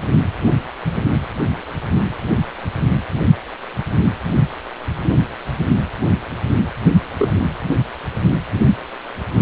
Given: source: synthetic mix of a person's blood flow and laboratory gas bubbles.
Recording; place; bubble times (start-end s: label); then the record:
Doppler ultrasound of blood flow; precordium
7.19-7.40 s: bubbles
From the record:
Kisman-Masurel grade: 112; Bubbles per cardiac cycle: 1 to 2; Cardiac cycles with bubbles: 1 to 10%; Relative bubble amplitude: moderate (0.250 to 0.450); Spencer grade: 1 (occasional bubble signal discernible with the cardiac motion signal, with majority of cardiac periods free of bubbles); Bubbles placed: anywhere in the cardiac cycle